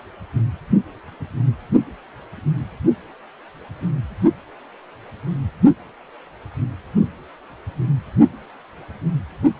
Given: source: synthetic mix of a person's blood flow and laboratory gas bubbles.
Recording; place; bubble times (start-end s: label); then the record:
Doppler ultrasound of blood flow; precordium
no bubbles
From the record:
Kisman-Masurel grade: 000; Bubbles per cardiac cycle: 0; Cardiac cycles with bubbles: 0%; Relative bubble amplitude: no bubbles discernible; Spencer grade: 0 (complete lack of bubble signals)